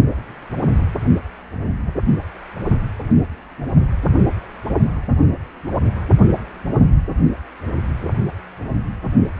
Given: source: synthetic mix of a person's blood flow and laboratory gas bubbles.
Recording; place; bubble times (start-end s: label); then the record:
Doppler ultrasound of blood flow; precordium
no bubbles
From the record:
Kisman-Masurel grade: 000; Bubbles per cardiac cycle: 0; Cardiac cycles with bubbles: 0%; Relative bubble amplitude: no bubbles discernible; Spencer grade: 0 (complete lack of bubble signals)